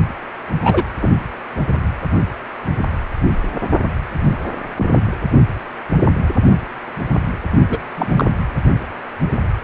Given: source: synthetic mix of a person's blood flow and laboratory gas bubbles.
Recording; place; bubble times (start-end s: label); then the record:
Doppler ultrasound of blood flow; precordium
0.63-0.84 s: bubbles
1.02-1.08 s: bubbles
4.23-4.36 s: bubbles
4.76-5.02 s: bubbles
7.70-7.79 s: bubbles
7.97-8.24 s: bubbles
From the record:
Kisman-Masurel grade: 123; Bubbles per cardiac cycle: 1 to 2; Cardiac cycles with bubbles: 10 to 50%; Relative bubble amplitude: loud (0.450 to 0.775); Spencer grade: 2 (many but less than half of the cardiac periods contain bubble signals, singularly or in groups); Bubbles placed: anywhere in the cardiac cycle